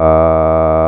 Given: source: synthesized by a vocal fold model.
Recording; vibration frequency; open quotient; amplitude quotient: sustained vowel; 80 Hz; 0.5; 1.4